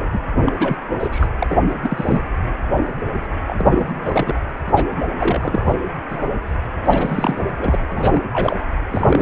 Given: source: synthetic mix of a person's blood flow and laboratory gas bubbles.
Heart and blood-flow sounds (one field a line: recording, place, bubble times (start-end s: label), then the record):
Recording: Doppler ultrasound of blood flow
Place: precordium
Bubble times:
0.00-0.19 s: bubbles
0.41-0.52 s: bubbles
0.59-0.82 s: bubbles
1.00-1.27 s: bubbles
1.40-1.58 s: bubbles
1.69-1.75 s: bubbles
1.83-2.21 s: bubbles
3.48-4.38 s: bubbles
4.66-4.85 s: bubbles
5.18-5.75 s: bubbles
6.09-6.29 s: bubbles
6.85-7.50 s: bubbles
7.59-7.79 s: bubbles
7.91-8.22 s: bubbles
8.33-8.61 s: bubbles
8.90-9.22 s: bubbles
From the record:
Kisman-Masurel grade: 342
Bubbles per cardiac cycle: rolling drumbeat, 9 or more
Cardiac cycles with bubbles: 100%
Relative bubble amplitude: moderate (0.250 to 0.450)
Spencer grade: 3 (all of the cardiac periods contain showers or single bubble signals, but not dominating or overriding the cardiac motion signals)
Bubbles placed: anywhere in the cardiac cycle